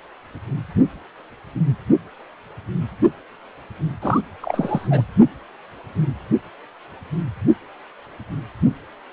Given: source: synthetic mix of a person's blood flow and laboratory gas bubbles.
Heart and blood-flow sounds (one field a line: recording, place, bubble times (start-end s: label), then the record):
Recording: Doppler ultrasound of blood flow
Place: precordium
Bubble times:
4.02-4.21 s: bubbles
4.41-5.02 s: bubbles
From the record:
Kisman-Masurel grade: 212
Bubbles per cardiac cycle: several, 3 to 8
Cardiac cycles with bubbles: 1 to 10%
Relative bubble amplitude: moderate (0.250 to 0.450)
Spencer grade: 1 (occasional bubble signal discernible with the cardiac motion signal, with majority of cardiac periods free of bubbles)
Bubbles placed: only in the low amplitude regions of the cardiac cycle